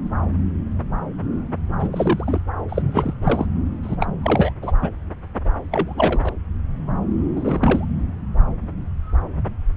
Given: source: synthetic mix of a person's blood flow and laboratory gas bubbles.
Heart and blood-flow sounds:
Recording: Doppler ultrasound of blood flow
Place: subclavian vein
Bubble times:
1.79-2.39 s: bubbles
2.69-3.14 s: bubbles
3.21-3.46 s: bubbles
3.83-3.96 s: bubbles
4.00-4.07 s: bubbles
4.23-4.53 s: bubbles
4.62-4.72 s: bubbles
4.82-4.90 s: bubbles
5.71-6.33 s: bubbles
7.36-7.87 s: bubbles
From the record:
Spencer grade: 2 (many but less than half of the cardiac periods contain bubble signals, singularly or in groups)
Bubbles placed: anywhere in the cardiac cycle

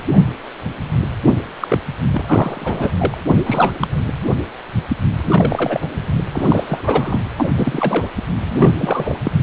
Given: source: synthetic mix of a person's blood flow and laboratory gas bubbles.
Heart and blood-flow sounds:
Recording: Doppler ultrasound of blood flow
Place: precordium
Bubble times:
1.60-1.78 s: bubbles
2.11-2.92 s: bubbles
2.97-3.18 s: bubbles
3.46-3.73 s: bubbles
3.79-3.88 s: bubbles
5.22-5.89 s: bubbles
6.33-7.19 s: bubbles
7.37-7.52 s: bubbles
7.56-8.07 s: bubbles
8.48-8.74 s: bubbles
8.79-9.17 s: bubbles
9.23-9.31 s: bubbles
From the record:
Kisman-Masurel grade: 332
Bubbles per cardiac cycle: rolling drumbeat, 9 or more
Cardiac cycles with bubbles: 50 to 99%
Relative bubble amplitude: moderate (0.250 to 0.450)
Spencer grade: 3 (all of the cardiac periods contain showers or single bubble signals, but not dominating or overriding the cardiac motion signals)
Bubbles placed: anywhere in the cardiac cycle

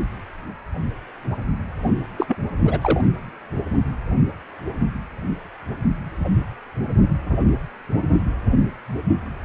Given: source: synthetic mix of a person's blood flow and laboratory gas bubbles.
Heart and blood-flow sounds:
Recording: Doppler ultrasound of blood flow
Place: precordium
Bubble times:
2.17-2.37 s: bubbles
2.65-2.79 s: bubbles
2.81-3.01 s: bubbles
From the record:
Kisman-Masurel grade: 212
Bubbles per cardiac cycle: several, 3 to 8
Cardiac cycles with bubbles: 1 to 10%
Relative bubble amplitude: moderate (0.250 to 0.450)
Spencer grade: 1 (occasional bubble signal discernible with the cardiac motion signal, with majority of cardiac periods free of bubbles)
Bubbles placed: anywhere in the cardiac cycle

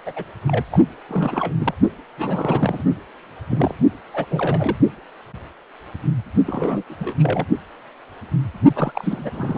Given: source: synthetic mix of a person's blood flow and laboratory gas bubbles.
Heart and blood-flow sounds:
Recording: Doppler ultrasound of blood flow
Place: precordium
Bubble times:
0.06-0.13 s: bubbles
0.15-0.24 s: bubbles
0.47-0.64 s: bubbles
0.71-0.80 s: bubbles
1.09-1.54 s: bubbles
1.61-1.74 s: bubbles
2.17-2.82 s: bubbles
3.50-3.75 s: bubbles
4.13-4.25 s: bubbles
4.30-4.77 s: bubbles
6.46-6.83 s: bubbles
6.89-7.16 s: bubbles
7.19-7.46 s: bubbles
8.75-9.30 s: bubbles
9.34-9.58 s: bubbles
From the record:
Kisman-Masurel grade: 332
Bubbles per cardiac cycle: rolling drumbeat, 9 or more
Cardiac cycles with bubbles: 50 to 99%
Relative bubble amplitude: moderate (0.250 to 0.450)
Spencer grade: 3 (all of the cardiac periods contain showers or single bubble signals, but not dominating or overriding the cardiac motion signals)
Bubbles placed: only in the low amplitude regions of the cardiac cycle

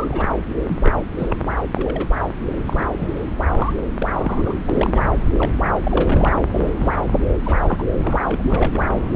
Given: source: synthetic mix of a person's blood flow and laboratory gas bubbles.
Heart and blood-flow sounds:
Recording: Doppler ultrasound of blood flow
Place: subclavian vein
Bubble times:
0.00-0.25 s: bubbles
0.68-0.78 s: bubbles
0.84-0.93 s: bubbles
1.18-1.37 s: bubbles
1.74-2.07 s: bubbles
2.65-2.83 s: bubbles
2.97-3.19 s: bubbles
3.54-3.73 s: bubbles
3.98-4.07 s: bubbles
4.10-4.59 s: bubbles
4.71-4.90 s: bubbles
4.95-5.01 s: bubbles
5.37-5.51 s: bubbles
5.83-6.29 s: bubbles
6.51-6.71 s: bubbles
6.77-6.92 s: bubbles
7.45-7.56 s: bubbles
7.67-7.84 s: bubbles
7.97-8.20 s: bubbles
8.29-8.84 s: bubbles
8.93-9.08 s: bubbles
From the record:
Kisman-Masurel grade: 242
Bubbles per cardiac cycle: several, 3 to 8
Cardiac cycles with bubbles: 100%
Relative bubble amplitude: moderate (0.250 to 0.450)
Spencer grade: 3 (all of the cardiac periods contain showers or single bubble signals, but not dominating or overriding the cardiac motion signals)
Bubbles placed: anywhere in the cardiac cycle

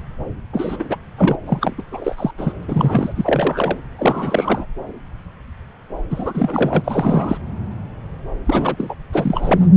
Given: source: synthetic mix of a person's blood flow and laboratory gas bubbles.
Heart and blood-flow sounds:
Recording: Doppler ultrasound of blood flow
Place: subclavian vein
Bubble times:
0.00-0.02 s: bubbles
0.53-0.97 s: bubbles
1.17-1.36 s: bubbles
1.46-1.75 s: bubbles
1.78-1.83 s: bubbles
1.92-2.31 s: bubbles
2.38-2.52 s: bubbles
2.62-2.65 s: bubbles
2.68-3.81 s: bubbles
3.98-4.66 s: bubbles
6.10-7.38 s: bubbles
8.46-8.95 s: bubbles
9.12-9.67 s: bubbles
From the record:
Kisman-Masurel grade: 332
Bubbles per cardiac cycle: rolling drumbeat, 9 or more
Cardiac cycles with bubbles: 50 to 99%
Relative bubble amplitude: moderate (0.250 to 0.450)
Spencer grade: 3 (all of the cardiac periods contain showers or single bubble signals, but not dominating or overriding the cardiac motion signals)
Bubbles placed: anywhere in the cardiac cycle

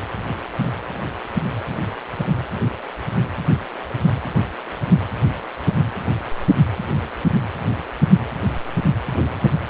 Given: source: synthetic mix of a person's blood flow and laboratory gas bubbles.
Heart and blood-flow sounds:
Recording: Doppler ultrasound of blood flow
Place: precordium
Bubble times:
no bubbles
From the record:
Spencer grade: 0 (complete lack of bubble signals)

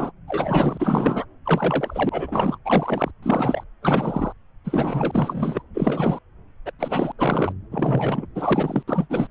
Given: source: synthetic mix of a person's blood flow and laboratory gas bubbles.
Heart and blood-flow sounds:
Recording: Doppler ultrasound of blood flow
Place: subclavian vein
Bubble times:
0.00-0.11 s: bubbles
0.28-1.25 s: bubbles
1.46-2.58 s: bubbles
2.66-3.11 s: bubbles
3.22-3.63 s: bubbles
3.83-4.33 s: bubbles
4.65-5.62 s: bubbles
5.74-6.19 s: bubbles
6.66-6.71 s: bubbles
6.79-7.12 s: bubbles
7.19-7.53 s: bubbles
7.71-8.26 s: bubbles
8.35-8.83 s: bubbles
8.88-9.06 s: bubbles
9.10-9.27 s: bubbles
From the record:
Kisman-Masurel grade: 342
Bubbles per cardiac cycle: rolling drumbeat, 9 or more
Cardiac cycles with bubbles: 100%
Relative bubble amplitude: moderate (0.250 to 0.450)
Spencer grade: 3 (all of the cardiac periods contain showers or single bubble signals, but not dominating or overriding the cardiac motion signals)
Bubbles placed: anywhere in the cardiac cycle

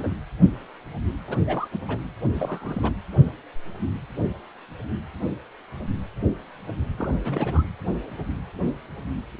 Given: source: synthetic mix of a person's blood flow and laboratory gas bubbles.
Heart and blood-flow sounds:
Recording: Doppler ultrasound of blood flow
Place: precordium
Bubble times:
0.00-0.08 s: bubbles
1.27-1.36 s: bubbles
1.47-1.68 s: bubbles
1.72-1.78 s: bubbles
1.88-1.97 s: bubbles
2.35-2.91 s: bubbles
6.97-7.08 s: bubbles
7.21-7.63 s: bubbles
From the record:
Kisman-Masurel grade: 221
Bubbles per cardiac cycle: several, 3 to 8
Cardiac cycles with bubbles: 10 to 50%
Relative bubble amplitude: barely perceptible (0.100 to 0.250)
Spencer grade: 2 (many but less than half of the cardiac periods contain bubble signals, singularly or in groups)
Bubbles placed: anywhere in the cardiac cycle

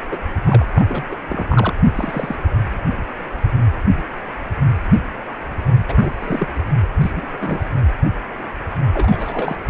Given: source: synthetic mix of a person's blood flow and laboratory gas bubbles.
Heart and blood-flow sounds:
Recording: Doppler ultrasound of blood flow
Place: precordium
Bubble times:
0.11-0.18 s: bubbles
0.45-0.66 s: bubbles
0.76-1.05 s: bubbles
1.11-1.16 s: bubbles
1.28-1.46 s: bubbles
1.49-1.74 s: bubbles
1.95-2.36 s: bubbles
5.78-5.85 s: bubbles
5.88-6.12 s: bubbles
6.20-6.47 s: bubbles
7.01-7.11 s: bubbles
7.15-7.25 s: bubbles
7.40-7.64 s: bubbles
8.93-9.57 s: bubbles
From the record:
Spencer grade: 3 (all of the cardiac periods contain showers or single bubble signals, but not dominating or overriding the cardiac motion signals)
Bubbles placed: anywhere in the cardiac cycle

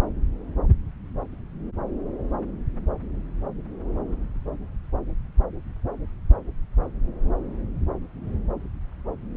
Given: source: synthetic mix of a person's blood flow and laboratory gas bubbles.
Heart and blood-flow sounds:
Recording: Doppler ultrasound of blood flow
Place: subclavian vein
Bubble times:
no bubbles
From the record:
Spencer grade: 0 (complete lack of bubble signals)

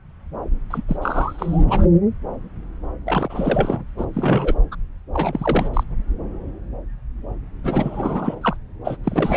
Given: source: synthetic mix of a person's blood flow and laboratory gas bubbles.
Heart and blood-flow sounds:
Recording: Doppler ultrasound of blood flow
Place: subclavian vein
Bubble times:
0.70-0.82 s: bubbles
0.88-0.97 s: bubbles
1.01-1.64 s: bubbles
1.67-1.83 s: bubbles
3.05-3.95 s: bubbles
3.97-4.06 s: bubbles
4.13-4.54 s: bubbles
4.71-4.75 s: bubbles
5.13-5.69 s: bubbles
5.73-5.83 s: bubbles
7.63-8.36 s: bubbles
8.41-8.56 s: bubbles
8.84-8.97 s: bubbles
9.04-9.37 s: bubbles
From the record:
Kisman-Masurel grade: 332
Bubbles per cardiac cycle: rolling drumbeat, 9 or more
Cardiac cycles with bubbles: 50 to 99%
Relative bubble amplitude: moderate (0.250 to 0.450)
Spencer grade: 3 (all of the cardiac periods contain showers or single bubble signals, but not dominating or overriding the cardiac motion signals)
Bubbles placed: anywhere in the cardiac cycle

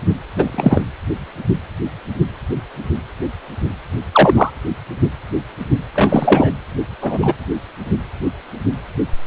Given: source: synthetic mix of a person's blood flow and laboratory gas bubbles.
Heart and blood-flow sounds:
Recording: Doppler ultrasound of blood flow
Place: precordium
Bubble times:
0.36-0.81 s: bubbles
4.12-4.50 s: bubbles
5.93-6.50 s: bubbles
7.01-7.18 s: bubbles
7.22-7.33 s: bubbles
From the record:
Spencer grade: 2 (many but less than half of the cardiac periods contain bubble signals, singularly or in groups)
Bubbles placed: anywhere in the cardiac cycle

